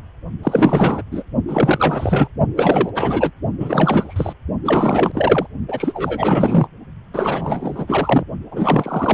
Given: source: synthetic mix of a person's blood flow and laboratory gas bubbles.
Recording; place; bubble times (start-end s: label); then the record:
Doppler ultrasound of blood flow; precordium
0.43-1.02 s: bubbles
1.11-1.24 s: bubbles
1.48-2.29 s: bubbles
2.56-2.90 s: bubbles
2.95-3.31 s: bubbles
3.60-4.33 s: bubbles
4.65-5.46 s: bubbles
5.68-6.67 s: bubbles
7.13-8.25 s: bubbles
8.51-9.14 s: bubbles
From the record:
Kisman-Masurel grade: 444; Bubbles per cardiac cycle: continuous sound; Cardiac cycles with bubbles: 100%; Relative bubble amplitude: maximal (0.775 to 0.999); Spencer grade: 4 (maximum detectable bubble signal sounding continuously throughout systole and diastole of every cardiac period, and overriding the amplitude of the normal cardiac signals); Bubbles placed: only in the low amplitude regions of the cardiac cycle